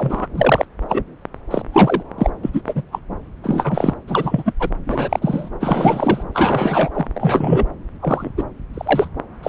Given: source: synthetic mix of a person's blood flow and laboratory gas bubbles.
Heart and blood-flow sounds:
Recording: Doppler ultrasound of blood flow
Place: subclavian vein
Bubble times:
0.00-0.27 s: bubbles
0.33-0.66 s: bubbles
0.88-1.03 s: bubbles
1.50-1.62 s: bubbles
1.73-2.03 s: bubbles
2.18-2.30 s: bubbles
2.43-2.50 s: bubbles
2.53-2.62 s: bubbles
2.66-2.83 s: bubbles
2.91-2.99 s: bubbles
3.43-3.94 s: bubbles
4.08-4.53 s: bubbles
4.60-4.70 s: bubbles
4.86-5.50 s: bubbles
5.60-6.24 s: bubbles
6.33-6.90 s: bubbles
6.94-7.07 s: bubbles
7.15-7.66 s: bubbles
8.01-8.32 s: bubbles
8.37-8.44 s: bubbles
8.73-9.08 s: bubbles
9.43-9.49 s: bubbles
From the record:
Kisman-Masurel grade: 243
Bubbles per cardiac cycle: several, 3 to 8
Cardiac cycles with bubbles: 100%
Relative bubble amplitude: loud (0.450 to 0.775)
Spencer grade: 3 (all of the cardiac periods contain showers or single bubble signals, but not dominating or overriding the cardiac motion signals)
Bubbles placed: anywhere in the cardiac cycle

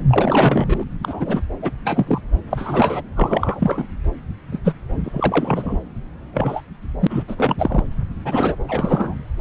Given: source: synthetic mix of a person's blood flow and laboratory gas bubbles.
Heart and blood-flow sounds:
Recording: Doppler ultrasound of blood flow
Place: subclavian vein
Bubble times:
0.09-0.83 s: bubbles
1.03-1.42 s: bubbles
1.62-1.72 s: bubbles
1.84-2.20 s: bubbles
2.50-3.02 s: bubbles
3.17-3.85 s: bubbles
4.52-4.59 s: bubbles
4.64-4.74 s: bubbles
5.04-5.79 s: bubbles
6.33-6.61 s: bubbles
7.00-7.07 s: bubbles
7.09-7.23 s: bubbles
7.28-7.84 s: bubbles
8.25-8.56 s: bubbles
8.68-9.15 s: bubbles
From the record:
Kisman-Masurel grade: 242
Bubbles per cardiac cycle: several, 3 to 8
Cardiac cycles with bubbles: 100%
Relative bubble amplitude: moderate (0.250 to 0.450)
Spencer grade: 3 (all of the cardiac periods contain showers or single bubble signals, but not dominating or overriding the cardiac motion signals)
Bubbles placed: anywhere in the cardiac cycle

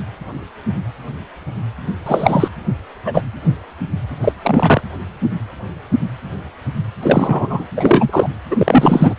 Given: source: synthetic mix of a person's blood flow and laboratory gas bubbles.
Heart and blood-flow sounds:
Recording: Doppler ultrasound of blood flow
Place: precordium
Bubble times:
2.06-2.48 s: bubbles
3.05-3.22 s: bubbles
4.21-4.33 s: bubbles
4.42-4.81 s: bubbles
7.03-7.64 s: bubbles
7.76-8.29 s: bubbles
8.50-9.14 s: bubbles
From the record:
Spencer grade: 2 (many but less than half of the cardiac periods contain bubble signals, singularly or in groups)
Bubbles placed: anywhere in the cardiac cycle

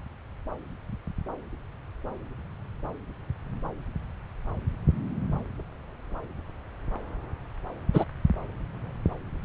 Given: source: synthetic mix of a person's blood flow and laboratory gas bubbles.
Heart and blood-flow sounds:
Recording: Doppler ultrasound of blood flow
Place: subclavian vein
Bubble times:
7.94-8.04 s: bubbles
From the record:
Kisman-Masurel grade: 113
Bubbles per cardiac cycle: 1 to 2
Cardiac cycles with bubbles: 1 to 10%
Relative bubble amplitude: loud (0.450 to 0.775)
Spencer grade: 1 (occasional bubble signal discernible with the cardiac motion signal, with majority of cardiac periods free of bubbles)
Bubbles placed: anywhere in the cardiac cycle

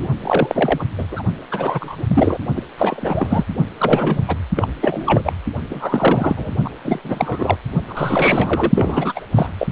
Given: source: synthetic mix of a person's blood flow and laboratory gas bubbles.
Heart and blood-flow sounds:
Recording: Doppler ultrasound of blood flow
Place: precordium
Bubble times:
0.00-0.08 s: bubbles
0.23-0.84 s: bubbles
0.98-1.06 s: bubbles
1.11-1.22 s: bubbles
1.51-2.38 s: bubbles
2.56-2.62 s: bubbles
2.78-3.45 s: bubbles
3.78-4.37 s: bubbles
4.56-4.67 s: bubbles
4.81-5.33 s: bubbles
5.70-6.51 s: bubbles
6.64-6.70 s: bubbles
6.84-7.00 s: bubbles
7.04-7.57 s: bubbles
7.88-8.72 s: bubbles
8.75-9.12 s: bubbles
9.15-9.20 s: bubbles
9.35-9.51 s: bubbles
9.57-9.67 s: bubbles
From the record:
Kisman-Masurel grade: 343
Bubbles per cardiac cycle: rolling drumbeat, 9 or more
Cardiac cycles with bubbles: 100%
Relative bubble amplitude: loud (0.450 to 0.775)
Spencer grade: 3 (all of the cardiac periods contain showers or single bubble signals, but not dominating or overriding the cardiac motion signals)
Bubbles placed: only in the low amplitude regions of the cardiac cycle

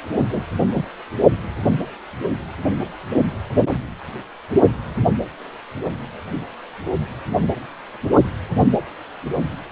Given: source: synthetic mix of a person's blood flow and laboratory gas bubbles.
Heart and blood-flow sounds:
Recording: Doppler ultrasound of blood flow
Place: precordium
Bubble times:
0.15-0.45 s: bubbles
0.68-0.85 s: bubbles
From the record:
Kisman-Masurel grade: 211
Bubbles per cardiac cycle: several, 3 to 8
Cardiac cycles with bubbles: 1 to 10%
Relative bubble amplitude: barely perceptible (0.100 to 0.250)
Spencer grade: 1 (occasional bubble signal discernible with the cardiac motion signal, with majority of cardiac periods free of bubbles)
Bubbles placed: only in the low amplitude regions of the cardiac cycle

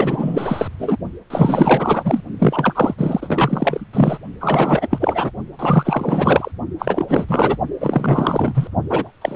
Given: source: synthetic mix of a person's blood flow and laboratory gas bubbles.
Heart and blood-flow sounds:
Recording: Doppler ultrasound of blood flow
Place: precordium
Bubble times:
0.00-0.68 s: bubbles
0.79-0.96 s: bubbles
1.30-2.21 s: bubbles
2.38-2.94 s: bubbles
2.98-3.85 s: bubbles
3.93-4.18 s: bubbles
4.41-4.88 s: bubbles
4.90-5.31 s: bubbles
5.59-6.52 s: bubbles
6.79-7.26 s: bubbles
7.28-7.57 s: bubbles
7.80-8.70 s: bubbles
8.89-9.11 s: bubbles
9.21-9.36 s: bubbles
From the record:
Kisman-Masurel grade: 444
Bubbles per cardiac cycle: continuous sound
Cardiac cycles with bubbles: 100%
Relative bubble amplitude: maximal (0.775 to 0.999)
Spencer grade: 4 (maximum detectable bubble signal sounding continuously throughout systole and diastole of every cardiac period, and overriding the amplitude of the normal cardiac signals)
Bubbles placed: only in the low amplitude regions of the cardiac cycle

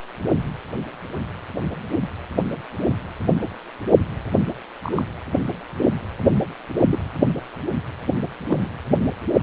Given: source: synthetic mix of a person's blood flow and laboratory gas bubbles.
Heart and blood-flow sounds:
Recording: Doppler ultrasound of blood flow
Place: precordium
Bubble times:
4.83-4.92 s: bubbles
4.95-5.03 s: bubbles
5.77-5.87 s: bubbles
6.90-6.99 s: bubbles
8.48-8.69 s: bubbles
From the record:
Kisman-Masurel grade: 121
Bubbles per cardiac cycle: 1 to 2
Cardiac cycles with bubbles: 10 to 50%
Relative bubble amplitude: barely perceptible (0.100 to 0.250)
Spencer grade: 2 (many but less than half of the cardiac periods contain bubble signals, singularly or in groups)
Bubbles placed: anywhere in the cardiac cycle

